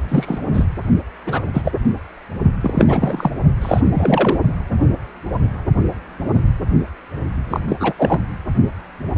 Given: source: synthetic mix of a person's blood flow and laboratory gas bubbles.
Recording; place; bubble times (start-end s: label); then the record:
Doppler ultrasound of blood flow; precordium
0.08-0.39 s: bubbles
0.53-0.66 s: bubbles
1.26-1.41 s: bubbles
1.54-1.72 s: bubbles
2.61-3.32 s: bubbles
3.62-3.81 s: bubbles
3.94-4.39 s: bubbles
7.50-7.60 s: bubbles
7.68-7.76 s: bubbles
7.80-7.93 s: bubbles
7.97-8.20 s: bubbles
From the record:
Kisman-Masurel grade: 233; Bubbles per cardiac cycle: several, 3 to 8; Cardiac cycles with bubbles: 50 to 99%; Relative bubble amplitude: loud (0.450 to 0.775); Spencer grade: 3 (all of the cardiac periods contain showers or single bubble signals, but not dominating or overriding the cardiac motion signals); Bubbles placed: only in the low amplitude regions of the cardiac cycle